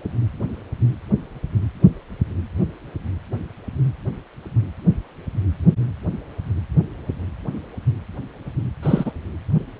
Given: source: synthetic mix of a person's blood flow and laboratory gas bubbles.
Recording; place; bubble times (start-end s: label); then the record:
Doppler ultrasound of blood flow; precordium
8.82-9.12 s: bubbles
From the record:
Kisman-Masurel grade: 113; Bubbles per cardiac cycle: 1 to 2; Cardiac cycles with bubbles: 1 to 10%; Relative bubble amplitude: loud (0.450 to 0.775); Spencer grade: 1 (occasional bubble signal discernible with the cardiac motion signal, with majority of cardiac periods free of bubbles); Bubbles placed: anywhere in the cardiac cycle